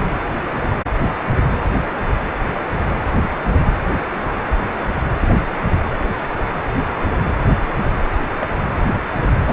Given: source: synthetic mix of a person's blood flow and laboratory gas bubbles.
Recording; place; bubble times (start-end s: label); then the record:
Doppler ultrasound of blood flow; precordium
8.41-8.47 s: bubbles
8.54-8.91 s: bubbles
9.40-9.53 s: bubbles
From the record:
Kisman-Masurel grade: 221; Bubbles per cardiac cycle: several, 3 to 8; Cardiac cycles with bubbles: 10 to 50%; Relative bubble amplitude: barely perceptible (0.100 to 0.250); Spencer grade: 2 (many but less than half of the cardiac periods contain bubble signals, singularly or in groups); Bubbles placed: anywhere in the cardiac cycle